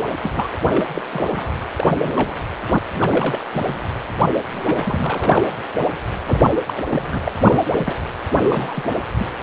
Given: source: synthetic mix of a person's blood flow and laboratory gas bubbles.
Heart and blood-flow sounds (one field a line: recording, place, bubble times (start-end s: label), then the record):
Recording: Doppler ultrasound of blood flow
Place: precordium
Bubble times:
0.22-0.49 s: bubbles
0.68-0.83 s: bubbles
0.95-1.01 s: bubbles
1.12-1.53 s: bubbles
1.76-2.36 s: bubbles
2.74-2.79 s: bubbles
2.94-3.45 s: bubbles
3.53-3.80 s: bubbles
4.52-5.49 s: bubbles
6.25-6.41 s: bubbles
6.66-6.74 s: bubbles
6.76-6.84 s: bubbles
6.89-7.19 s: bubbles
7.25-7.32 s: bubbles
7.45-7.61 s: bubbles
7.71-7.95 s: bubbles
8.33-8.84 s: bubbles
9.17-9.29 s: bubbles
From the record:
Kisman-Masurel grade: 242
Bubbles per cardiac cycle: several, 3 to 8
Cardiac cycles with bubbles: 100%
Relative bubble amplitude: moderate (0.250 to 0.450)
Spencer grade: 3 (all of the cardiac periods contain showers or single bubble signals, but not dominating or overriding the cardiac motion signals)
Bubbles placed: anywhere in the cardiac cycle